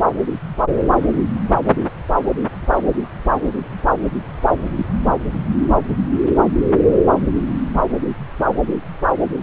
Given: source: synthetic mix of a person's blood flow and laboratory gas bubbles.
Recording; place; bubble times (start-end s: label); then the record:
Doppler ultrasound of blood flow; subclavian vein
4.77-4.86 s: bubbles
From the record:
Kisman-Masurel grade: 112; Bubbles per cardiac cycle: 1 to 2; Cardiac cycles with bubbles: 1 to 10%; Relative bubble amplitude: moderate (0.250 to 0.450); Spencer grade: 1 (occasional bubble signal discernible with the cardiac motion signal, with majority of cardiac periods free of bubbles); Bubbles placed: anywhere in the cardiac cycle